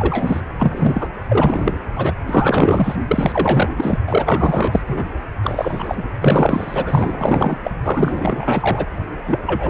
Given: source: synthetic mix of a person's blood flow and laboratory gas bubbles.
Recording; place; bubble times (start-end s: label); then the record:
Doppler ultrasound of blood flow; precordium
0.00-0.41 s: bubbles
0.59-1.08 s: bubbles
1.29-1.77 s: bubbles
1.96-2.13 s: bubbles
2.27-2.96 s: bubbles
3.07-3.75 s: bubbles
3.77-3.99 s: bubbles
4.07-4.82 s: bubbles
4.87-5.04 s: bubbles
5.42-6.04 s: bubbles
6.21-7.57 s: bubbles
7.63-7.71 s: bubbles
7.84-8.86 s: bubbles
9.26-9.39 s: bubbles
9.46-9.70 s: bubbles
From the record:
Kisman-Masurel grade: 444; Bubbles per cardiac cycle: continuous sound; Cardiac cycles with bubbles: 100%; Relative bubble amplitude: maximal (0.775 to 0.999); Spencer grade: 4 (maximum detectable bubble signal sounding continuously throughout systole and diastole of every cardiac period, and overriding the amplitude of the normal cardiac signals); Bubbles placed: anywhere in the cardiac cycle